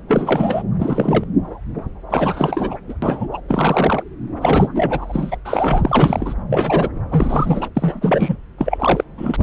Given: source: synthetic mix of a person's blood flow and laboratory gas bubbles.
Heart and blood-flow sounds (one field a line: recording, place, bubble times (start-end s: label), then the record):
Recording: Doppler ultrasound of blood flow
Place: subclavian vein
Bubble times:
0.08-0.62 s: bubbles
0.78-1.24 s: bubbles
2.10-2.78 s: bubbles
2.88-2.93 s: bubbles
3.02-3.28 s: bubbles
3.32-3.41 s: bubbles
3.49-4.04 s: bubbles
4.41-4.69 s: bubbles
4.74-5.37 s: bubbles
5.44-6.34 s: bubbles
6.50-6.88 s: bubbles
7.10-7.68 s: bubbles
7.75-8.38 s: bubbles
8.58-9.04 s: bubbles
9.17-9.42 s: bubbles
From the record:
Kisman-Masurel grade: 333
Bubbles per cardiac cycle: rolling drumbeat, 9 or more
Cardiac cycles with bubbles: 50 to 99%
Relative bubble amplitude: loud (0.450 to 0.775)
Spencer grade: 3 (all of the cardiac periods contain showers or single bubble signals, but not dominating or overriding the cardiac motion signals)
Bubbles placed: anywhere in the cardiac cycle